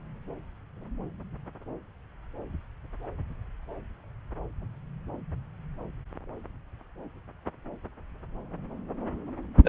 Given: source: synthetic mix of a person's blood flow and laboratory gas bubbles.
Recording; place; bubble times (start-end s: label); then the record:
Doppler ultrasound of blood flow; subclavian vein
9.63-9.69 s: bubbles
From the record:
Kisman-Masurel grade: 122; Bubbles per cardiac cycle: 1 to 2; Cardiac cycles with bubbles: 10 to 50%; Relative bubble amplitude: moderate (0.250 to 0.450); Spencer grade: 2 (many but less than half of the cardiac periods contain bubble signals, singularly or in groups); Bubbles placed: anywhere in the cardiac cycle